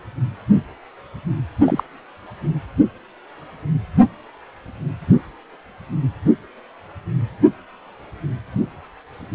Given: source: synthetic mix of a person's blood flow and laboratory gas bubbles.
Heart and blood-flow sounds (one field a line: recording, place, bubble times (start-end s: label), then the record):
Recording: Doppler ultrasound of blood flow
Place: precordium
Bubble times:
1.65-1.83 s: bubbles
From the record:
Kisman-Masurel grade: 112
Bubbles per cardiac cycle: 1 to 2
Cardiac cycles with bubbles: 1 to 10%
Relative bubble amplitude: moderate (0.250 to 0.450)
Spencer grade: 1 (occasional bubble signal discernible with the cardiac motion signal, with majority of cardiac periods free of bubbles)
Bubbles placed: anywhere in the cardiac cycle